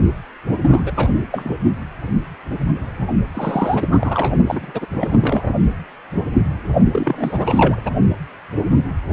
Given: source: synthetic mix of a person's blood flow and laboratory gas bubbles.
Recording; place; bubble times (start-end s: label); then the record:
Doppler ultrasound of blood flow; precordium
0.61-1.08 s: bubbles
1.31-1.56 s: bubbles
3.33-3.89 s: bubbles
3.91-4.37 s: bubbles
4.47-4.86 s: bubbles
4.89-5.54 s: bubbles
6.92-7.83 s: bubbles
7.85-7.91 s: bubbles
From the record:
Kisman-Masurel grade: 332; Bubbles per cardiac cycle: rolling drumbeat, 9 or more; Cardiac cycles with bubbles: 50 to 99%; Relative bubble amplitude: moderate (0.250 to 0.450); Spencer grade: 3 (all of the cardiac periods contain showers or single bubble signals, but not dominating or overriding the cardiac motion signals); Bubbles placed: only in the low amplitude regions of the cardiac cycle